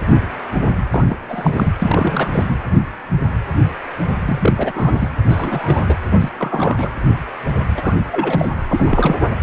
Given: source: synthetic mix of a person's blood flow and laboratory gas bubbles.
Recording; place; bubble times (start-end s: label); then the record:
Doppler ultrasound of blood flow; precordium
0.90-1.16 s: bubbles
1.28-1.74 s: bubbles
1.82-2.45 s: bubbles
2.48-2.56 s: bubbles
4.25-4.72 s: bubbles
4.75-5.09 s: bubbles
5.29-5.83 s: bubbles
5.87-5.96 s: bubbles
6.19-6.29 s: bubbles
6.38-6.90 s: bubbles
7.76-7.95 s: bubbles
8.11-8.49 s: bubbles
8.68-9.18 s: bubbles
From the record:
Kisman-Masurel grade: 232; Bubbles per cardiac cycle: several, 3 to 8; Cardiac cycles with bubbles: 50 to 99%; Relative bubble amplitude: moderate (0.250 to 0.450); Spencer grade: 3 (all of the cardiac periods contain showers or single bubble signals, but not dominating or overriding the cardiac motion signals); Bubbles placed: anywhere in the cardiac cycle